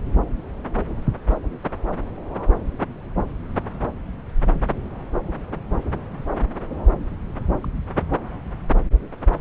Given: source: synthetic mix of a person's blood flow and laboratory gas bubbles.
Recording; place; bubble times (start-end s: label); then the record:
Doppler ultrasound of blood flow; subclavian vein
7.64-7.67 s: bubbles
From the record:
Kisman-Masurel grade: 121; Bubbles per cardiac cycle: 1 to 2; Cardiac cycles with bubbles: 10 to 50%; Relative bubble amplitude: barely perceptible (0.100 to 0.250); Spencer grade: 2 (many but less than half of the cardiac periods contain bubble signals, singularly or in groups); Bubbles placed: anywhere in the cardiac cycle